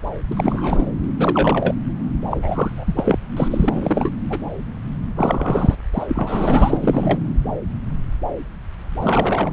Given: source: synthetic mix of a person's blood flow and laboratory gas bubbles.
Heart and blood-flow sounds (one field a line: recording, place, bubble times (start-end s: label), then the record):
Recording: Doppler ultrasound of blood flow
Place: subclavian vein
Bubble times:
0.30-0.85 s: bubbles
1.18-1.75 s: bubbles
2.27-3.19 s: bubbles
3.36-4.10 s: bubbles
4.29-4.41 s: bubbles
5.17-5.75 s: bubbles
5.93-7.20 s: bubbles
9.01-9.53 s: bubbles
From the record:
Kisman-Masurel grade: 332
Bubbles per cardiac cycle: rolling drumbeat, 9 or more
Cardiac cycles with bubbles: 50 to 99%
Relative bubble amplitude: moderate (0.250 to 0.450)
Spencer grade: 3 (all of the cardiac periods contain showers or single bubble signals, but not dominating or overriding the cardiac motion signals)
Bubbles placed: anywhere in the cardiac cycle